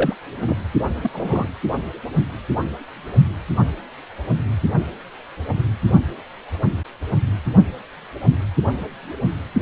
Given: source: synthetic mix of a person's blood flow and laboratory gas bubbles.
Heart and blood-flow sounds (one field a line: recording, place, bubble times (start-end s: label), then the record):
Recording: Doppler ultrasound of blood flow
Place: precordium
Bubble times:
0.00-0.15 s: bubbles
0.47-0.56 s: bubbles
1.02-1.10 s: bubbles
1.12-1.48 s: bubbles
From the record:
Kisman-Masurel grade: 212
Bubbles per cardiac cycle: several, 3 to 8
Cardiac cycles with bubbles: 1 to 10%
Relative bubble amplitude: moderate (0.250 to 0.450)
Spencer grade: 1 (occasional bubble signal discernible with the cardiac motion signal, with majority of cardiac periods free of bubbles)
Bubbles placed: only in the low amplitude regions of the cardiac cycle